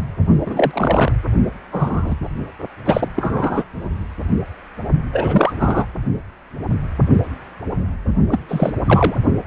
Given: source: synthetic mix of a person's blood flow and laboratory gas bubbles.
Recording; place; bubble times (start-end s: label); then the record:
Doppler ultrasound of blood flow; precordium
0.46-1.12 s: bubbles
1.72-2.15 s: bubbles
2.85-3.08 s: bubbles
3.16-3.65 s: bubbles
5.12-5.53 s: bubbles
5.59-5.86 s: bubbles
8.29-8.39 s: bubbles
8.48-8.73 s: bubbles
8.86-9.15 s: bubbles
From the record:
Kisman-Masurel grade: 223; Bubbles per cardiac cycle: several, 3 to 8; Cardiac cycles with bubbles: 10 to 50%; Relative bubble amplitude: loud (0.450 to 0.775); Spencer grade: 2 (many but less than half of the cardiac periods contain bubble signals, singularly or in groups); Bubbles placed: only in the low amplitude regions of the cardiac cycle